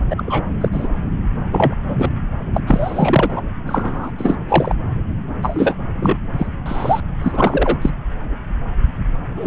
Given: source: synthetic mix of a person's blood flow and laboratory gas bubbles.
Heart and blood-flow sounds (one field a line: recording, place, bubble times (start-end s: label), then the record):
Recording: Doppler ultrasound of blood flow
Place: subclavian vein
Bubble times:
0.10-0.54 s: bubbles
0.60-0.68 s: bubbles
0.72-0.88 s: bubbles
1.52-1.75 s: bubbles
1.88-2.10 s: bubbles
2.54-2.60 s: bubbles
2.67-3.41 s: bubbles
3.67-4.12 s: bubbles
4.17-4.36 s: bubbles
4.49-4.73 s: bubbles
5.42-5.76 s: bubbles
6.00-6.18 s: bubbles
6.38-6.47 s: bubbles
6.66-7.00 s: bubbles
7.23-7.76 s: bubbles
7.82-7.90 s: bubbles
9.36-9.47 s: bubbles
From the record:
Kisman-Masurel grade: 243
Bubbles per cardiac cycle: several, 3 to 8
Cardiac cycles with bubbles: 100%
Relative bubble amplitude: loud (0.450 to 0.775)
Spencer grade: 3 (all of the cardiac periods contain showers or single bubble signals, but not dominating or overriding the cardiac motion signals)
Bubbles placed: anywhere in the cardiac cycle